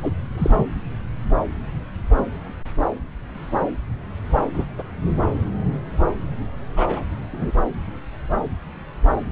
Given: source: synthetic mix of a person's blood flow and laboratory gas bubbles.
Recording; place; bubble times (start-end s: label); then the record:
Doppler ultrasound of blood flow; subclavian vein
0.02-0.12 s: bubbles
0.38-0.67 s: bubbles
4.54-4.65 s: bubbles
4.78-4.83 s: bubbles
6.77-7.04 s: bubbles
7.33-7.51 s: bubbles
From the record:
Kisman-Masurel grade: 122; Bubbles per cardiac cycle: 1 to 2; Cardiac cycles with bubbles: 10 to 50%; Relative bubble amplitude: moderate (0.250 to 0.450); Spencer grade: 2 (many but less than half of the cardiac periods contain bubble signals, singularly or in groups); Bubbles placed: anywhere in the cardiac cycle